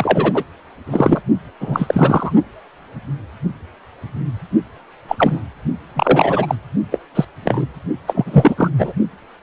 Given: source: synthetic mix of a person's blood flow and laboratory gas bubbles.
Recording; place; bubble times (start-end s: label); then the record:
Doppler ultrasound of blood flow; precordium
0.00-0.44 s: bubbles
0.86-1.21 s: bubbles
1.60-2.33 s: bubbles
5.08-5.40 s: bubbles
5.96-6.55 s: bubbles
6.91-6.99 s: bubbles
7.15-7.25 s: bubbles
7.45-7.65 s: bubbles
8.07-8.68 s: bubbles
8.78-8.92 s: bubbles
From the record:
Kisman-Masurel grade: 233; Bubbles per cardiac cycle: several, 3 to 8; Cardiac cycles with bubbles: 50 to 99%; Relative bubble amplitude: loud (0.450 to 0.775); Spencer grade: 3 (all of the cardiac periods contain showers or single bubble signals, but not dominating or overriding the cardiac motion signals); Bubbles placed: only in the low amplitude regions of the cardiac cycle